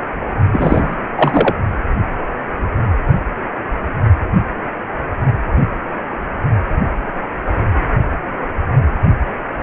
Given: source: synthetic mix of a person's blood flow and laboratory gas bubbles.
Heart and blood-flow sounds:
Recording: Doppler ultrasound of blood flow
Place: precordium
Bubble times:
0.52-0.95 s: bubbles
1.16-1.53 s: bubbles
From the record:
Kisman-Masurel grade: 223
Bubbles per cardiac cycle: several, 3 to 8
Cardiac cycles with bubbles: 10 to 50%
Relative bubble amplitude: loud (0.450 to 0.775)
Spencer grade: 2 (many but less than half of the cardiac periods contain bubble signals, singularly or in groups)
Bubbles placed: only in the low amplitude regions of the cardiac cycle

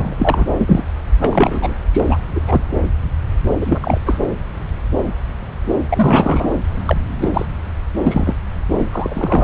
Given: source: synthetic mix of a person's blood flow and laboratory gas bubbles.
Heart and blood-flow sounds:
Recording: Doppler ultrasound of blood flow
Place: subclavian vein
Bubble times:
0.00-0.45 s: bubbles
0.58-0.84 s: bubbles
1.19-1.74 s: bubbles
1.93-2.18 s: bubbles
2.34-2.40 s: bubbles
2.48-2.61 s: bubbles
3.60-3.98 s: bubbles
4.06-4.21 s: bubbles
5.90-6.54 s: bubbles
6.86-6.97 s: bubbles
7.21-7.29 s: bubbles
7.33-7.46 s: bubbles
8.06-8.35 s: bubbles
8.72-8.85 s: bubbles
8.91-9.44 s: bubbles
From the record:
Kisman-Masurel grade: 233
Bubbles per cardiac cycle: several, 3 to 8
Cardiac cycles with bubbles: 50 to 99%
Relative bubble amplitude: loud (0.450 to 0.775)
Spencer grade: 3 (all of the cardiac periods contain showers or single bubble signals, but not dominating or overriding the cardiac motion signals)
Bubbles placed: anywhere in the cardiac cycle

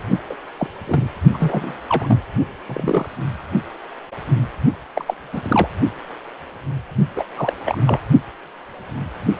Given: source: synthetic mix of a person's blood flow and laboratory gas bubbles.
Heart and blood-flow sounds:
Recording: Doppler ultrasound of blood flow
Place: precordium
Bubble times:
0.29-0.35 s: bubbles
0.58-0.67 s: bubbles
0.86-1.08 s: bubbles
1.33-1.79 s: bubbles
1.89-2.18 s: bubbles
2.66-3.08 s: bubbles
4.95-5.15 s: bubbles
5.32-5.67 s: bubbles
7.16-7.24 s: bubbles
7.36-7.53 s: bubbles
7.66-7.78 s: bubbles
7.87-8.00 s: bubbles
From the record:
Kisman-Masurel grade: 222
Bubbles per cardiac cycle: several, 3 to 8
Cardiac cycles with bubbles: 10 to 50%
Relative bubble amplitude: moderate (0.250 to 0.450)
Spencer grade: 2 (many but less than half of the cardiac periods contain bubble signals, singularly or in groups)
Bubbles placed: only in the low amplitude regions of the cardiac cycle

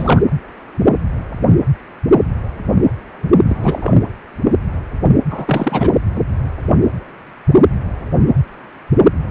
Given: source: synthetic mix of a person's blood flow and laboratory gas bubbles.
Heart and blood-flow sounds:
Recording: Doppler ultrasound of blood flow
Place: precordium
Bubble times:
0.00-0.21 s: bubbles
3.48-3.96 s: bubbles
5.30-5.91 s: bubbles
From the record:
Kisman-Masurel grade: 223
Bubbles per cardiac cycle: several, 3 to 8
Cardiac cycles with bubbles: 10 to 50%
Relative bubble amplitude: loud (0.450 to 0.775)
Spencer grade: 2 (many but less than half of the cardiac periods contain bubble signals, singularly or in groups)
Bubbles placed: anywhere in the cardiac cycle

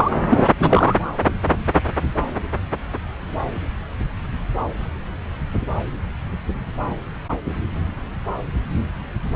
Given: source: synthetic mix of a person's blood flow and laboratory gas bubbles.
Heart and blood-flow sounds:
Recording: Doppler ultrasound of blood flow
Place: subclavian vein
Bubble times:
0.00-0.11 s: bubbles
0.29-0.46 s: bubbles
0.59-0.95 s: bubbles
From the record:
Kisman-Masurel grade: 213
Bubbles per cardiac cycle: several, 3 to 8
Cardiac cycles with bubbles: 1 to 10%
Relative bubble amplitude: loud (0.450 to 0.775)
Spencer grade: 1 (occasional bubble signal discernible with the cardiac motion signal, with majority of cardiac periods free of bubbles)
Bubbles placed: anywhere in the cardiac cycle

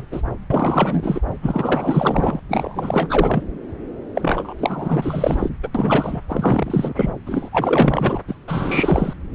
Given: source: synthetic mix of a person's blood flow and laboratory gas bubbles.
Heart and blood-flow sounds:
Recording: Doppler ultrasound of blood flow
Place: subclavian vein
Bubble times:
0.00-0.05 s: bubbles
0.11-0.22 s: bubbles
0.50-1.22 s: bubbles
1.42-2.40 s: bubbles
2.48-3.43 s: bubbles
4.14-4.53 s: bubbles
4.58-5.50 s: bubbles
5.62-5.68 s: bubbles
5.74-6.20 s: bubbles
6.28-7.14 s: bubbles
7.26-7.49 s: bubbles
7.52-8.20 s: bubbles
8.28-8.35 s: bubbles
8.47-9.13 s: bubbles
From the record:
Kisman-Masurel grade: 444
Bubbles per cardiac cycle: continuous sound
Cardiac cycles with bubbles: 100%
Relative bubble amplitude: maximal (0.775 to 0.999)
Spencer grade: 4 (maximum detectable bubble signal sounding continuously throughout systole and diastole of every cardiac period, and overriding the amplitude of the normal cardiac signals)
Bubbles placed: anywhere in the cardiac cycle

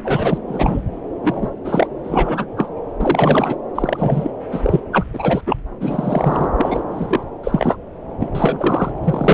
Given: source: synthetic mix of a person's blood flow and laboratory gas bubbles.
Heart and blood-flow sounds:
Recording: Doppler ultrasound of blood flow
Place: subclavian vein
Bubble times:
0.04-0.38 s: bubbles
0.48-0.83 s: bubbles
1.23-1.51 s: bubbles
1.65-1.87 s: bubbles
2.04-2.46 s: bubbles
2.56-2.71 s: bubbles
2.99-3.56 s: bubbles
3.75-4.31 s: bubbles
4.51-4.81 s: bubbles
4.92-5.04 s: bubbles
5.13-5.41 s: bubbles
5.46-5.57 s: bubbles
5.80-6.50 s: bubbles
6.57-6.80 s: bubbles
6.92-7.24 s: bubbles
7.44-7.77 s: bubbles
8.20-8.30 s: bubbles
8.35-8.92 s: bubbles
9.04-9.34 s: bubbles
From the record:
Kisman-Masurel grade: 243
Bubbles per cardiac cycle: several, 3 to 8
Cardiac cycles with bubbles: 100%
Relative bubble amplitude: loud (0.450 to 0.775)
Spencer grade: 3 (all of the cardiac periods contain showers or single bubble signals, but not dominating or overriding the cardiac motion signals)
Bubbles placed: anywhere in the cardiac cycle

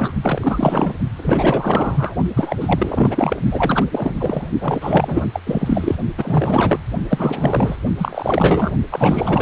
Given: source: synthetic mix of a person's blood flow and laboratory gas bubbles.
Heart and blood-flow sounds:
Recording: Doppler ultrasound of blood flow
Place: precordium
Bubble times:
0.00-0.14 s: bubbles
0.22-0.94 s: bubbles
1.16-2.15 s: bubbles
2.36-2.56 s: bubbles
2.60-3.42 s: bubbles
3.51-3.85 s: bubbles
3.91-4.46 s: bubbles
4.61-5.28 s: bubbles
5.33-5.41 s: bubbles
5.46-5.95 s: bubbles
6.17-6.78 s: bubbles
7.09-7.76 s: bubbles
7.98-8.71 s: bubbles
8.91-9.42 s: bubbles
From the record:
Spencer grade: 4 (maximum detectable bubble signal sounding continuously throughout systole and diastole of every cardiac period, and overriding the amplitude of the normal cardiac signals)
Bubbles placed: only in the low amplitude regions of the cardiac cycle

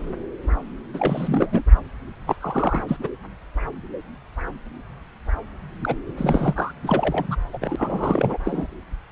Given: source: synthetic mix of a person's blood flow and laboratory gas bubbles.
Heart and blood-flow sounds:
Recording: Doppler ultrasound of blood flow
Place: subclavian vein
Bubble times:
0.94-1.63 s: bubbles
2.26-2.36 s: bubbles
2.41-2.83 s: bubbles
2.88-2.96 s: bubbles
3.01-3.08 s: bubbles
5.81-5.95 s: bubbles
6.17-6.71 s: bubbles
6.83-7.36 s: bubbles
7.53-8.38 s: bubbles
8.45-8.67 s: bubbles
From the record:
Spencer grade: 3 (all of the cardiac periods contain showers or single bubble signals, but not dominating or overriding the cardiac motion signals)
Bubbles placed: anywhere in the cardiac cycle

